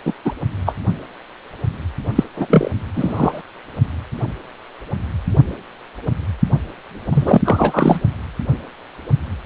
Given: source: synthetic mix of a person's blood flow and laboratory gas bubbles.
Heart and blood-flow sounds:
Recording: Doppler ultrasound of blood flow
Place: precordium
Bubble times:
0.05-0.14 s: bubbles
0.25-0.32 s: bubbles
0.65-0.73 s: bubbles
2.15-2.23 s: bubbles
2.37-2.47 s: bubbles
2.50-2.71 s: bubbles
2.96-3.41 s: bubbles
7.12-7.41 s: bubbles
7.44-8.00 s: bubbles
From the record:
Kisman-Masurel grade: 223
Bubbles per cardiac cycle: several, 3 to 8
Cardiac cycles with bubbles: 10 to 50%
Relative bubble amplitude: loud (0.450 to 0.775)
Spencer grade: 2 (many but less than half of the cardiac periods contain bubble signals, singularly or in groups)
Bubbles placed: only in the low amplitude regions of the cardiac cycle

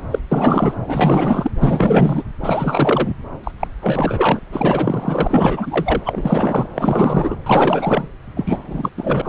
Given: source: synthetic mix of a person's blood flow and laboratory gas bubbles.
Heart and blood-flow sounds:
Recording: Doppler ultrasound of blood flow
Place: subclavian vein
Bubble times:
0.11-0.19 s: bubbles
0.31-0.74 s: bubbles
0.86-1.51 s: bubbles
1.61-2.22 s: bubbles
2.40-3.15 s: bubbles
3.43-3.51 s: bubbles
3.59-3.67 s: bubbles
3.81-4.39 s: bubbles
4.52-6.01 s: bubbles
6.05-6.68 s: bubbles
6.75-7.36 s: bubbles
7.46-8.08 s: bubbles
8.36-8.60 s: bubbles
8.67-8.90 s: bubbles
8.97-9.29 s: bubbles
From the record:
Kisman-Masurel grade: 444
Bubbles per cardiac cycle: continuous sound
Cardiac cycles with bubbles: 100%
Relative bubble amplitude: maximal (0.775 to 0.999)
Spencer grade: 4 (maximum detectable bubble signal sounding continuously throughout systole and diastole of every cardiac period, and overriding the amplitude of the normal cardiac signals)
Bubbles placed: anywhere in the cardiac cycle

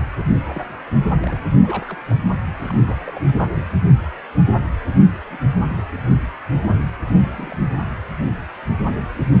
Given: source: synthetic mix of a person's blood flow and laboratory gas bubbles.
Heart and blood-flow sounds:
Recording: Doppler ultrasound of blood flow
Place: precordium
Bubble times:
0.34-0.64 s: bubbles
1.21-1.41 s: bubbles
1.60-1.97 s: bubbles
2.06-2.19 s: bubbles
2.60-3.68 s: bubbles
5.30-5.38 s: bubbles
5.67-5.83 s: bubbles
7.20-7.57 s: bubbles
7.61-7.71 s: bubbles
From the record:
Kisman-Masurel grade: 221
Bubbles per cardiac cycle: several, 3 to 8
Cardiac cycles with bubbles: 10 to 50%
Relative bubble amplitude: barely perceptible (0.100 to 0.250)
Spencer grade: 2 (many but less than half of the cardiac periods contain bubble signals, singularly or in groups)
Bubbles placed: anywhere in the cardiac cycle

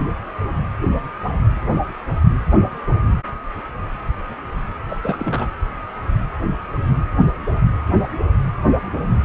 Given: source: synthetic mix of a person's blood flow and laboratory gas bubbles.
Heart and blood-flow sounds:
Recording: Doppler ultrasound of blood flow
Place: precordium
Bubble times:
4.89-4.97 s: bubbles
5.02-5.50 s: bubbles
From the record:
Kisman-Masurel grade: 211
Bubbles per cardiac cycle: several, 3 to 8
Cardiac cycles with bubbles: 1 to 10%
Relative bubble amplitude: barely perceptible (0.100 to 0.250)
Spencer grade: 1 (occasional bubble signal discernible with the cardiac motion signal, with majority of cardiac periods free of bubbles)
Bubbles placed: anywhere in the cardiac cycle

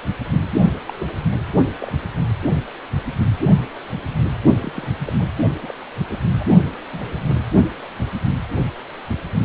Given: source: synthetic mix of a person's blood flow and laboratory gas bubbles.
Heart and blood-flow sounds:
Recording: Doppler ultrasound of blood flow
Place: precordium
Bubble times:
0.88-0.93 s: bubbles
0.99-1.06 s: bubbles
1.80-1.92 s: bubbles
4.60-4.72 s: bubbles
4.74-4.88 s: bubbles
5.05-5.13 s: bubbles
5.19-5.26 s: bubbles
5.61-5.74 s: bubbles
6.09-6.18 s: bubbles
6.39-6.44 s: bubbles
6.64-6.70 s: bubbles
6.92-7.19 s: bubbles
7.27-7.41 s: bubbles
From the record:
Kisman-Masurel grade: 221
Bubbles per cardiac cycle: several, 3 to 8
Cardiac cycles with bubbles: 10 to 50%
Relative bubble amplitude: barely perceptible (0.100 to 0.250)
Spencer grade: 2 (many but less than half of the cardiac periods contain bubble signals, singularly or in groups)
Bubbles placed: only in the low amplitude regions of the cardiac cycle

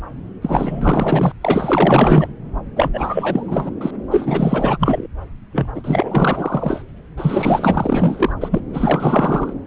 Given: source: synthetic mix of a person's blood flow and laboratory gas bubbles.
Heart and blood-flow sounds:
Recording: Doppler ultrasound of blood flow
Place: subclavian vein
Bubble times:
0.41-1.32 s: bubbles
1.41-2.27 s: bubbles
2.76-2.90 s: bubbles
2.93-3.71 s: bubbles
3.81-3.91 s: bubbles
4.11-5.07 s: bubbles
5.52-5.67 s: bubbles
5.75-6.82 s: bubbles
7.17-8.33 s: bubbles
8.41-8.61 s: bubbles
8.73-9.53 s: bubbles
From the record:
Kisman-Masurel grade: 444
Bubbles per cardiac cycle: continuous sound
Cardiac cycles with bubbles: 100%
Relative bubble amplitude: maximal (0.775 to 0.999)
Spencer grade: 4 (maximum detectable bubble signal sounding continuously throughout systole and diastole of every cardiac period, and overriding the amplitude of the normal cardiac signals)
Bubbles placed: anywhere in the cardiac cycle

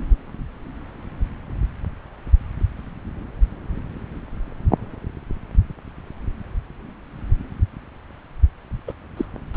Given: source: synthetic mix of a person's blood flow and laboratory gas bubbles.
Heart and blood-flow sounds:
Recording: Doppler ultrasound of blood flow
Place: subclavian vein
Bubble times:
8.87-8.92 s: bubbles
9.17-9.25 s: bubbles
9.54-9.57 s: bubbles
From the record:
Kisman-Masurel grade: 212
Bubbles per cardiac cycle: several, 3 to 8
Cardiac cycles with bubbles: 1 to 10%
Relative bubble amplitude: moderate (0.250 to 0.450)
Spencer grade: 1 (occasional bubble signal discernible with the cardiac motion signal, with majority of cardiac periods free of bubbles)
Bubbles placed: anywhere in the cardiac cycle

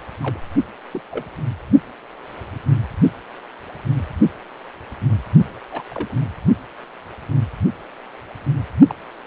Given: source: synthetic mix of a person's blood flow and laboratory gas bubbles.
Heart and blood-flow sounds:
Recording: Doppler ultrasound of blood flow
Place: precordium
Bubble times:
0.22-0.40 s: bubbles
0.93-1.02 s: bubbles
1.10-1.25 s: bubbles
5.72-5.83 s: bubbles
5.91-6.13 s: bubbles
8.89-8.94 s: bubbles
From the record:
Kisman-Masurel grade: 121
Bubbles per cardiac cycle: 1 to 2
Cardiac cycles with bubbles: 10 to 50%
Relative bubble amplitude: barely perceptible (0.100 to 0.250)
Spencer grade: 2 (many but less than half of the cardiac periods contain bubble signals, singularly or in groups)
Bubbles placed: only in the low amplitude regions of the cardiac cycle

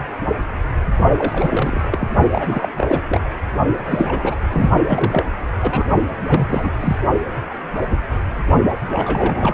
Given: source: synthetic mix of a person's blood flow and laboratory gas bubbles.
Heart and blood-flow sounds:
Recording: Doppler ultrasound of blood flow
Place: precordium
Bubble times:
1.18-1.80 s: bubbles
1.92-2.08 s: bubbles
2.31-2.68 s: bubbles
2.76-3.01 s: bubbles
3.09-3.20 s: bubbles
3.85-4.35 s: bubbles
4.50-4.71 s: bubbles
4.88-5.24 s: bubbles
5.62-5.85 s: bubbles
6.28-6.71 s: bubbles
6.80-6.96 s: bubbles
8.88-9.54 s: bubbles
From the record:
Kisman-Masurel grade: 332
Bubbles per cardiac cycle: rolling drumbeat, 9 or more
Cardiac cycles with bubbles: 50 to 99%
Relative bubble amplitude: moderate (0.250 to 0.450)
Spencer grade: 3 (all of the cardiac periods contain showers or single bubble signals, but not dominating or overriding the cardiac motion signals)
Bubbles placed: only in the low amplitude regions of the cardiac cycle

